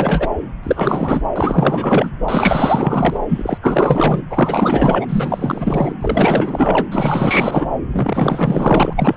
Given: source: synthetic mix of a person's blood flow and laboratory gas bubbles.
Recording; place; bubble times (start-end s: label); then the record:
Doppler ultrasound of blood flow; subclavian vein
0.00-0.29 s: bubbles
0.63-1.21 s: bubbles
1.35-2.10 s: bubbles
2.28-3.17 s: bubbles
3.29-3.58 s: bubbles
3.61-4.21 s: bubbles
4.29-5.06 s: bubbles
5.08-5.94 s: bubbles
6.00-6.86 s: bubbles
6.90-7.67 s: bubbles
7.92-8.94 s: bubbles
8.96-9.15 s: bubbles
From the record:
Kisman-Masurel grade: 444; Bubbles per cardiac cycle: continuous sound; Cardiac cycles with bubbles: 100%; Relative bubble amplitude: maximal (0.775 to 0.999); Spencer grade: 4 (maximum detectable bubble signal sounding continuously throughout systole and diastole of every cardiac period, and overriding the amplitude of the normal cardiac signals); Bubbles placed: anywhere in the cardiac cycle